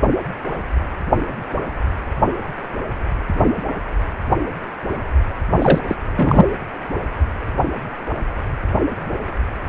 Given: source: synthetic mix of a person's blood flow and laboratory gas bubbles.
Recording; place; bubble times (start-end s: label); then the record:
Doppler ultrasound of blood flow; precordium
5.58-5.81 s: bubbles
5.87-5.96 s: bubbles
6.17-6.46 s: bubbles
From the record:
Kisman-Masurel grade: 213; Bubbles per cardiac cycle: several, 3 to 8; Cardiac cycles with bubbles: 1 to 10%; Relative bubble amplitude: loud (0.450 to 0.775); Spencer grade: 1 (occasional bubble signal discernible with the cardiac motion signal, with majority of cardiac periods free of bubbles); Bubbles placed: anywhere in the cardiac cycle